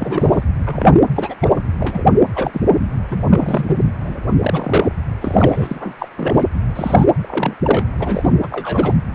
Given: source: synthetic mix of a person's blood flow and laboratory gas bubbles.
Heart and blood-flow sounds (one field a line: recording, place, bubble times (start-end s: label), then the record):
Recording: Doppler ultrasound of blood flow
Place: precordium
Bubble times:
0.00-0.43 s: bubbles
0.66-0.99 s: bubbles
1.16-1.34 s: bubbles
1.41-1.52 s: bubbles
1.79-2.04 s: bubbles
2.35-2.51 s: bubbles
2.53-2.61 s: bubbles
2.66-2.70 s: bubbles
3.09-3.25 s: bubbles
3.31-3.78 s: bubbles
4.04-4.23 s: bubbles
4.41-4.92 s: bubbles
5.19-5.94 s: bubbles
5.98-6.08 s: bubbles
6.18-6.47 s: bubbles
6.75-7.05 s: bubbles
7.21-7.54 s: bubbles
7.62-7.84 s: bubbles
7.99-8.33 s: bubbles
8.41-8.94 s: bubbles
From the record:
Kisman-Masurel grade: 242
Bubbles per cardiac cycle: several, 3 to 8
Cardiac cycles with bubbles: 100%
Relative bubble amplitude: moderate (0.250 to 0.450)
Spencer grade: 3 (all of the cardiac periods contain showers or single bubble signals, but not dominating or overriding the cardiac motion signals)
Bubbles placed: anywhere in the cardiac cycle